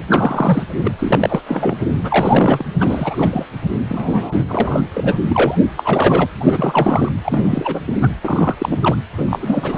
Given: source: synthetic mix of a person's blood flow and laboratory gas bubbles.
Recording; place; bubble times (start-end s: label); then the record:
Doppler ultrasound of blood flow; precordium
0.00-0.04 s: bubbles
0.10-0.63 s: bubbles
0.79-0.91 s: bubbles
0.98-1.42 s: bubbles
1.47-1.77 s: bubbles
2.01-2.65 s: bubbles
2.80-3.46 s: bubbles
3.88-4.43 s: bubbles
4.48-4.83 s: bubbles
4.93-5.21 s: bubbles
5.27-5.58 s: bubbles
5.77-6.26 s: bubbles
6.40-7.12 s: bubbles
7.24-7.80 s: bubbles
7.87-7.95 s: bubbles
8.00-8.10 s: bubbles
8.24-8.54 s: bubbles
8.58-8.96 s: bubbles
9.18-9.27 s: bubbles
9.30-9.78 s: bubbles
From the record:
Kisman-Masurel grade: 343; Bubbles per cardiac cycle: rolling drumbeat, 9 or more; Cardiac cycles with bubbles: 100%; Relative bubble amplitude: loud (0.450 to 0.775); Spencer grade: 3 (all of the cardiac periods contain showers or single bubble signals, but not dominating or overriding the cardiac motion signals); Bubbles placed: anywhere in the cardiac cycle